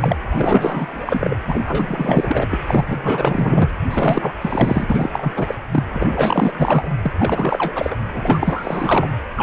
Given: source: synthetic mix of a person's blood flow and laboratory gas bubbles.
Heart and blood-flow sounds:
Doppler ultrasound of blood flow; precordium
0.00-0.16 s: bubbles
0.30-1.35 s: bubbles
1.47-2.47 s: bubbles
2.50-2.59 s: bubbles
2.67-3.70 s: bubbles
3.84-4.35 s: bubbles
4.41-5.54 s: bubbles
5.71-5.84 s: bubbles
5.93-6.89 s: bubbles
7.02-7.12 s: bubbles
7.19-7.96 s: bubbles
8.05-9.09 s: bubbles
9.36-9.43 s: bubbles
From the record:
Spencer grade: 4 (maximum detectable bubble signal sounding continuously throughout systole and diastole of every cardiac period, and overriding the amplitude of the normal cardiac signals); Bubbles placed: anywhere in the cardiac cycle

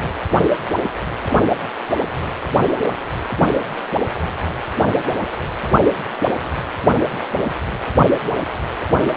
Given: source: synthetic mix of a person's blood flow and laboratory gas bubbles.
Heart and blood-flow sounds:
Doppler ultrasound of blood flow; precordium
no bubbles
From the record:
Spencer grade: 0 (complete lack of bubble signals)

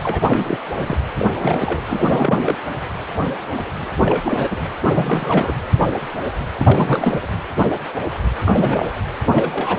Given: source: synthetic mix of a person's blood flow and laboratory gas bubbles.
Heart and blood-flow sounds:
Doppler ultrasound of blood flow; precordium
0.03-0.57 s: bubbles
0.77-0.97 s: bubbles
1.18-1.28 s: bubbles
1.31-1.34 s: bubbles
1.38-1.81 s: bubbles
1.86-2.56 s: bubbles
3.98-4.56 s: bubbles
4.95-5.52 s: bubbles
6.58-7.29 s: bubbles
8.41-8.88 s: bubbles
9.31-9.79 s: bubbles
From the record:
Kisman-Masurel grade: 332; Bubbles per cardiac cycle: rolling drumbeat, 9 or more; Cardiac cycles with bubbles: 50 to 99%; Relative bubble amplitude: moderate (0.250 to 0.450); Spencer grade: 3 (all of the cardiac periods contain showers or single bubble signals, but not dominating or overriding the cardiac motion signals); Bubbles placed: anywhere in the cardiac cycle

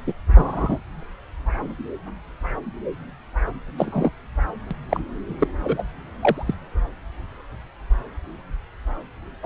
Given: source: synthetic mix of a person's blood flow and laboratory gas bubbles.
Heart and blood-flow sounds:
Doppler ultrasound of blood flow; subclavian vein
0.07-0.13 s: bubbles
0.35-0.78 s: bubbles
3.78-4.11 s: bubbles
4.71-4.74 s: bubbles
4.89-5.00 s: bubbles
5.41-5.47 s: bubbles
5.63-5.83 s: bubbles
6.19-6.54 s: bubbles
9.42-9.46 s: bubbles
From the record:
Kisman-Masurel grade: 122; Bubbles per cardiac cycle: 1 to 2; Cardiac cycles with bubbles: 10 to 50%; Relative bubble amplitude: moderate (0.250 to 0.450); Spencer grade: 2 (many but less than half of the cardiac periods contain bubble signals, singularly or in groups); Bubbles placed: anywhere in the cardiac cycle

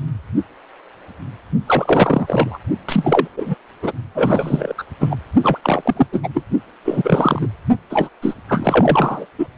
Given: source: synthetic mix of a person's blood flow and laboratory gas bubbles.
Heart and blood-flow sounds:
Doppler ultrasound of blood flow; precordium
1.66-2.58 s: bubbles
2.88-3.27 s: bubbles
3.36-3.55 s: bubbles
3.83-3.92 s: bubbles
4.14-4.75 s: bubbles
4.78-4.83 s: bubbles
5.00-5.17 s: bubbles
5.43-5.58 s: bubbles
5.63-6.07 s: bubbles
6.12-6.20 s: bubbles
6.23-6.29 s: bubbles
6.33-6.44 s: bubbles
6.84-7.47 s: bubbles
7.90-8.09 s: bubbles
8.22-8.35 s: bubbles
8.49-9.26 s: bubbles
9.39-9.47 s: bubbles
From the record:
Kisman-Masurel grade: 333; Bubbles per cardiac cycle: rolling drumbeat, 9 or more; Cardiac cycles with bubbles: 50 to 99%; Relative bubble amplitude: loud (0.450 to 0.775); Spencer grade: 3 (all of the cardiac periods contain showers or single bubble signals, but not dominating or overriding the cardiac motion signals); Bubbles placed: only in the low amplitude regions of the cardiac cycle

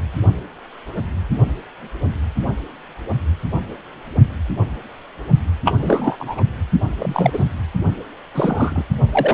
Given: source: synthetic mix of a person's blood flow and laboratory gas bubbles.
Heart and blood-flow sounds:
Doppler ultrasound of blood flow; precordium
5.65-5.72 s: bubbles
5.78-6.42 s: bubbles
6.99-7.44 s: bubbles
8.34-8.83 s: bubbles
9.12-9.33 s: bubbles
From the record:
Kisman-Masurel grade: 233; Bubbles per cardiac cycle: several, 3 to 8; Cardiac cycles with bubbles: 50 to 99%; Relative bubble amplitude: loud (0.450 to 0.775); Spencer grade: 3 (all of the cardiac periods contain showers or single bubble signals, but not dominating or overriding the cardiac motion signals); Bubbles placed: only in the low amplitude regions of the cardiac cycle

